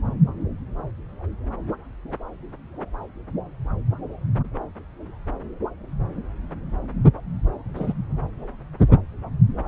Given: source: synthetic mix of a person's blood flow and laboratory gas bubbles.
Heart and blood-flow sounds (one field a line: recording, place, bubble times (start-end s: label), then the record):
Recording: Doppler ultrasound of blood flow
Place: subclavian vein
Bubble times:
7.75-7.93 s: bubbles
From the record:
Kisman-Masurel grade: 112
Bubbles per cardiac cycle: 1 to 2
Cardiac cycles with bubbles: 1 to 10%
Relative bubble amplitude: moderate (0.250 to 0.450)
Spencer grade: 1 (occasional bubble signal discernible with the cardiac motion signal, with majority of cardiac periods free of bubbles)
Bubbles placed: anywhere in the cardiac cycle